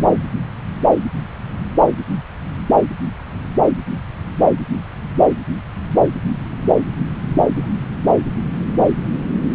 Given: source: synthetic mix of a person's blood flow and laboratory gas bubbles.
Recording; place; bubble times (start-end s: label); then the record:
Doppler ultrasound of blood flow; subclavian vein
7.54-7.71 s: bubbles
8.04-8.11 s: bubbles
From the record:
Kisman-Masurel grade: 111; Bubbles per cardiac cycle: 1 to 2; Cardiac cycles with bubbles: 1 to 10%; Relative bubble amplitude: barely perceptible (0.100 to 0.250); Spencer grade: 1 (occasional bubble signal discernible with the cardiac motion signal, with majority of cardiac periods free of bubbles); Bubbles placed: anywhere in the cardiac cycle